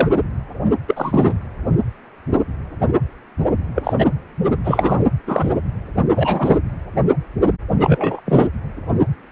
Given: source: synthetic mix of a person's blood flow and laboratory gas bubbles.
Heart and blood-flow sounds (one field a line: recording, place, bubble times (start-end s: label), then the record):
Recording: Doppler ultrasound of blood flow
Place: precordium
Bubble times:
0.00-0.09 s: bubbles
0.88-1.35 s: bubbles
3.75-3.93 s: bubbles
3.98-4.07 s: bubbles
4.64-5.05 s: bubbles
5.26-5.50 s: bubbles
6.14-6.57 s: bubbles
7.79-8.21 s: bubbles
8.25-8.47 s: bubbles
From the record:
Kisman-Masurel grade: 223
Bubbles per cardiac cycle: several, 3 to 8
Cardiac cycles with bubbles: 10 to 50%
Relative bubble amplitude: loud (0.450 to 0.775)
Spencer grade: 2 (many but less than half of the cardiac periods contain bubble signals, singularly or in groups)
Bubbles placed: anywhere in the cardiac cycle